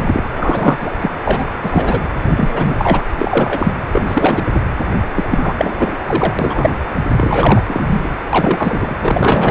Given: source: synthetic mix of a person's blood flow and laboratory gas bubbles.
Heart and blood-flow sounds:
Doppler ultrasound of blood flow; precordium
0.00-0.24 s: bubbles
0.34-0.77 s: bubbles
0.80-0.92 s: bubbles
0.99-1.10 s: bubbles
1.24-1.44 s: bubbles
1.62-2.04 s: bubbles
2.22-3.01 s: bubbles
3.19-3.73 s: bubbles
3.92-4.44 s: bubbles
4.53-4.61 s: bubbles
5.16-5.25 s: bubbles
5.30-5.56 s: bubbles
5.58-5.97 s: bubbles
6.07-6.34 s: bubbles
6.39-6.81 s: bubbles
7.17-7.63 s: bubbles
7.67-8.01 s: bubbles
8.04-8.09 s: bubbles
8.33-8.96 s: bubbles
9.02-9.51 s: bubbles
From the record:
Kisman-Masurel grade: 343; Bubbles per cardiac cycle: rolling drumbeat, 9 or more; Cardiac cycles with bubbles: 100%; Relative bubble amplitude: loud (0.450 to 0.775); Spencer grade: 3 (all of the cardiac periods contain showers or single bubble signals, but not dominating or overriding the cardiac motion signals); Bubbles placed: anywhere in the cardiac cycle

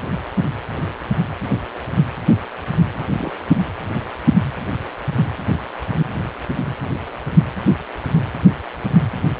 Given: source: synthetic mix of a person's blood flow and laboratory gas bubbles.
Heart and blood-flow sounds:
Doppler ultrasound of blood flow; precordium
2.94-3.04 s: bubbles
3.08-3.38 s: bubbles
From the record:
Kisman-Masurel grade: 211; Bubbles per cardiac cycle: several, 3 to 8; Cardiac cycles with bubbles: 1 to 10%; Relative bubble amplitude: barely perceptible (0.100 to 0.250); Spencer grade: 1 (occasional bubble signal discernible with the cardiac motion signal, with majority of cardiac periods free of bubbles); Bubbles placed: anywhere in the cardiac cycle

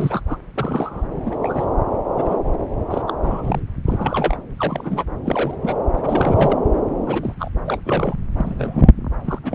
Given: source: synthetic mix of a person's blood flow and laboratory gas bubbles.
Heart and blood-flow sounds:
Doppler ultrasound of blood flow; subclavian vein
0.00-0.21 s: bubbles
0.27-0.38 s: bubbles
0.55-1.05 s: bubbles
1.25-1.36 s: bubbles
1.43-1.66 s: bubbles
2.15-2.41 s: bubbles
2.91-3.02 s: bubbles
3.07-3.13 s: bubbles
3.24-3.60 s: bubbles
3.87-4.37 s: bubbles
4.58-5.04 s: bubbles
5.25-5.55 s: bubbles
5.62-5.75 s: bubbles
5.95-6.60 s: bubbles
7.06-7.35 s: bubbles
7.39-7.49 s: bubbles
7.65-7.80 s: bubbles
7.85-8.14 s: bubbles
8.37-8.89 s: bubbles
9.25-9.39 s: bubbles
9.43-9.55 s: bubbles
From the record:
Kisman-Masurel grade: 242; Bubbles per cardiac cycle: several, 3 to 8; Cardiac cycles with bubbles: 100%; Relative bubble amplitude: moderate (0.250 to 0.450); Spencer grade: 3 (all of the cardiac periods contain showers or single bubble signals, but not dominating or overriding the cardiac motion signals); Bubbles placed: anywhere in the cardiac cycle

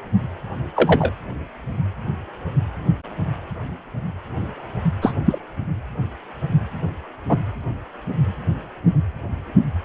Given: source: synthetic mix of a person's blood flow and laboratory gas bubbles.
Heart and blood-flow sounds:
Doppler ultrasound of blood flow; precordium
0.76-1.12 s: bubbles
5.02-5.13 s: bubbles
5.25-5.38 s: bubbles
7.29-7.38 s: bubbles
From the record:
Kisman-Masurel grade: 123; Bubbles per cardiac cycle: 1 to 2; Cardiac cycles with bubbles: 10 to 50%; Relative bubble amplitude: loud (0.450 to 0.775); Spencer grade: 2 (many but less than half of the cardiac periods contain bubble signals, singularly or in groups); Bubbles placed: anywhere in the cardiac cycle

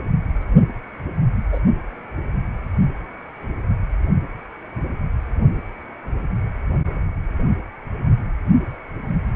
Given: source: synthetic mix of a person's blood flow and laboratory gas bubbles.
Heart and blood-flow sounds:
Doppler ultrasound of blood flow; precordium
1.52-1.59 s: bubbles
From the record:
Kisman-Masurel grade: 112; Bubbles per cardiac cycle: 1 to 2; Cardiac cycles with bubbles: 1 to 10%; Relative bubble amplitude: moderate (0.250 to 0.450); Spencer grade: 1 (occasional bubble signal discernible with the cardiac motion signal, with majority of cardiac periods free of bubbles); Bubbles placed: only in the low amplitude regions of the cardiac cycle

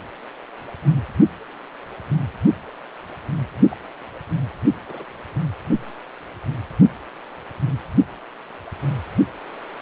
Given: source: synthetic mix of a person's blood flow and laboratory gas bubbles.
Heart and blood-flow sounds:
Doppler ultrasound of blood flow; precordium
3.71-3.77 s: bubbles
4.86-5.05 s: bubbles
From the record:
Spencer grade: 2 (many but less than half of the cardiac periods contain bubble signals, singularly or in groups); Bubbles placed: only in the low amplitude regions of the cardiac cycle

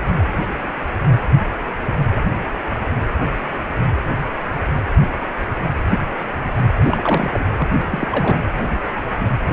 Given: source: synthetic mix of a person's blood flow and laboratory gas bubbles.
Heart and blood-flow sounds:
Doppler ultrasound of blood flow; precordium
6.83-7.46 s: bubbles
7.58-7.68 s: bubbles
7.90-8.08 s: bubbles
8.11-8.37 s: bubbles
From the record:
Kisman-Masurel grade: 222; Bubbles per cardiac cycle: several, 3 to 8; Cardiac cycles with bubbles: 10 to 50%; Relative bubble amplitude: moderate (0.250 to 0.450); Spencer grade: 2 (many but less than half of the cardiac periods contain bubble signals, singularly or in groups); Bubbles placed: anywhere in the cardiac cycle

